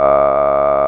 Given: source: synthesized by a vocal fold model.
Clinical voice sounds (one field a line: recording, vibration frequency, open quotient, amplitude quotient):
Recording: sustained vowel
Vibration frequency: 70 Hz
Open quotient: 0.1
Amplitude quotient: 1.4